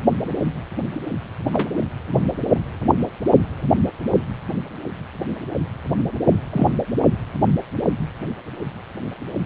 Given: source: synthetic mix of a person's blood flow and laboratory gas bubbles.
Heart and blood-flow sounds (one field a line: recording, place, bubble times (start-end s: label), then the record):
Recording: Doppler ultrasound of blood flow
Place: precordium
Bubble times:
1.52-1.69 s: bubbles
6.52-6.67 s: bubbles
From the record:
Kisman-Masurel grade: 123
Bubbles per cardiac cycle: 1 to 2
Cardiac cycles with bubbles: 10 to 50%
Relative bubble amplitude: loud (0.450 to 0.775)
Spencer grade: 2 (many but less than half of the cardiac periods contain bubble signals, singularly or in groups)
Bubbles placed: anywhere in the cardiac cycle